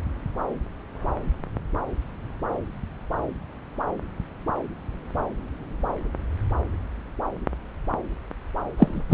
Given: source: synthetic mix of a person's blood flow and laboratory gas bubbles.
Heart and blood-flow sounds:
Doppler ultrasound of blood flow; subclavian vein
8.78-9.03 s: bubbles
9.10-9.14 s: bubbles
From the record:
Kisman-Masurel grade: 213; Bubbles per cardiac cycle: several, 3 to 8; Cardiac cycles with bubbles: 1 to 10%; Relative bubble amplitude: loud (0.450 to 0.775); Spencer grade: 1 (occasional bubble signal discernible with the cardiac motion signal, with majority of cardiac periods free of bubbles); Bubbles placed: anywhere in the cardiac cycle

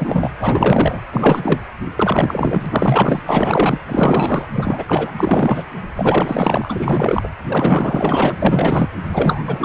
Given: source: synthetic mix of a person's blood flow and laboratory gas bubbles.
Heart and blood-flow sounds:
Doppler ultrasound of blood flow; precordium
0.00-0.30 s: bubbles
0.39-1.00 s: bubbles
1.12-1.60 s: bubbles
1.95-2.66 s: bubbles
2.70-3.22 s: bubbles
3.26-3.78 s: bubbles
3.88-4.45 s: bubbles
4.54-5.12 s: bubbles
5.17-5.66 s: bubbles
5.95-7.28 s: bubbles
7.48-8.36 s: bubbles
8.42-8.89 s: bubbles
9.11-9.65 s: bubbles
From the record:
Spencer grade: 4 (maximum detectable bubble signal sounding continuously throughout systole and diastole of every cardiac period, and overriding the amplitude of the normal cardiac signals); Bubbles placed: anywhere in the cardiac cycle

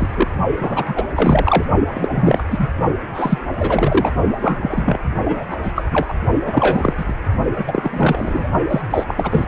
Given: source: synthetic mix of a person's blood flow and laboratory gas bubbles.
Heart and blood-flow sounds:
Doppler ultrasound of blood flow; precordium
0.00-0.30 s: bubbles
0.60-1.06 s: bubbles
1.15-1.65 s: bubbles
1.87-2.43 s: bubbles
2.50-2.68 s: bubbles
3.14-3.38 s: bubbles
3.54-4.13 s: bubbles
4.41-4.58 s: bubbles
4.60-4.99 s: bubbles
5.25-5.45 s: bubbles
5.50-5.57 s: bubbles
5.62-5.72 s: bubbles
5.75-6.13 s: bubbles
6.45-6.94 s: bubbles
6.97-7.15 s: bubbles
7.58-8.48 s: bubbles
8.69-8.81 s: bubbles
8.90-9.04 s: bubbles
9.07-9.45 s: bubbles
From the record:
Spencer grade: 3 (all of the cardiac periods contain showers or single bubble signals, but not dominating or overriding the cardiac motion signals); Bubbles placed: only in the low amplitude regions of the cardiac cycle

